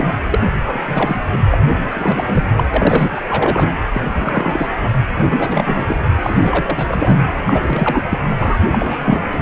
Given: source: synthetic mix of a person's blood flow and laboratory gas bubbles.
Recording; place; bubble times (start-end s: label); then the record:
Doppler ultrasound of blood flow; precordium
0.00-0.09 s: bubbles
0.30-0.40 s: bubbles
0.65-0.81 s: bubbles
0.87-1.19 s: bubbles
1.32-1.38 s: bubbles
1.51-1.58 s: bubbles
1.90-2.45 s: bubbles
2.57-2.63 s: bubbles
2.74-3.21 s: bubbles
3.27-3.70 s: bubbles
3.92-4.02 s: bubbles
4.16-4.67 s: bubbles
4.81-4.90 s: bubbles
5.30-5.37 s: bubbles
5.40-6.03 s: bubbles
6.21-7.21 s: bubbles
7.39-8.06 s: bubbles
8.09-8.18 s: bubbles
8.38-8.58 s: bubbles
8.72-9.22 s: bubbles
9.31-9.39 s: bubbles
From the record:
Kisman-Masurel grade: 343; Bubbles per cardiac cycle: rolling drumbeat, 9 or more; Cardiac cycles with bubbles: 100%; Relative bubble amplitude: loud (0.450 to 0.775); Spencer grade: 3 (all of the cardiac periods contain showers or single bubble signals, but not dominating or overriding the cardiac motion signals); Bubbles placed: anywhere in the cardiac cycle